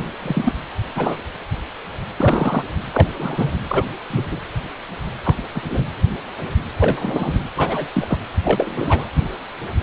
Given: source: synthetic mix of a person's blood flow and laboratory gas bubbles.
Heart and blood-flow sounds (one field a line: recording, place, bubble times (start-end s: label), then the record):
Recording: Doppler ultrasound of blood flow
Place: precordium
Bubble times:
0.00-0.04 s: bubbles
0.22-0.53 s: bubbles
0.95-1.21 s: bubbles
2.17-2.64 s: bubbles
2.93-3.07 s: bubbles
3.19-3.52 s: bubbles
3.69-3.85 s: bubbles
4.10-4.25 s: bubbles
4.31-4.38 s: bubbles
5.23-5.36 s: bubbles
5.54-5.62 s: bubbles
5.70-5.85 s: bubbles
6.79-7.44 s: bubbles
7.56-7.88 s: bubbles
7.93-8.18 s: bubbles
8.44-9.05 s: bubbles
From the record:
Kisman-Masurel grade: 233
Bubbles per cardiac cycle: several, 3 to 8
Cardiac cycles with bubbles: 50 to 99%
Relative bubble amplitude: loud (0.450 to 0.775)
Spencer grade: 3 (all of the cardiac periods contain showers or single bubble signals, but not dominating or overriding the cardiac motion signals)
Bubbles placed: anywhere in the cardiac cycle